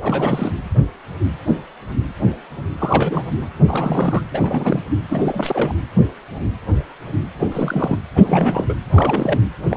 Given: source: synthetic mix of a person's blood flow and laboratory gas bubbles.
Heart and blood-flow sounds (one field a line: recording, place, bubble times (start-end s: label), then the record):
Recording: Doppler ultrasound of blood flow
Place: precordium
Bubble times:
0.01-0.51 s: bubbles
2.78-3.23 s: bubbles
3.67-4.23 s: bubbles
4.33-4.82 s: bubbles
5.08-5.75 s: bubbles
7.39-7.47 s: bubbles
7.52-7.98 s: bubbles
8.15-8.78 s: bubbles
8.93-9.41 s: bubbles
9.71-9.77 s: bubbles
From the record:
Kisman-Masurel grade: 332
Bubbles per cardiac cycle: rolling drumbeat, 9 or more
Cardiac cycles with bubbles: 50 to 99%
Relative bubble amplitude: moderate (0.250 to 0.450)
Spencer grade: 3 (all of the cardiac periods contain showers or single bubble signals, but not dominating or overriding the cardiac motion signals)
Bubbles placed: anywhere in the cardiac cycle